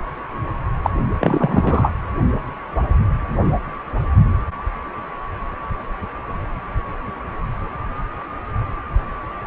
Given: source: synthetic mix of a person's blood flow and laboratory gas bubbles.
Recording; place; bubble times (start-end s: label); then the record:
Doppler ultrasound of blood flow; precordium
0.83-0.90 s: bubbles
1.21-1.93 s: bubbles
From the record:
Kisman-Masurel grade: 213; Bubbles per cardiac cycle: several, 3 to 8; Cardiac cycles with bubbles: 1 to 10%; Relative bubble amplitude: loud (0.450 to 0.775); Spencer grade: 1 (occasional bubble signal discernible with the cardiac motion signal, with majority of cardiac periods free of bubbles); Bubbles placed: anywhere in the cardiac cycle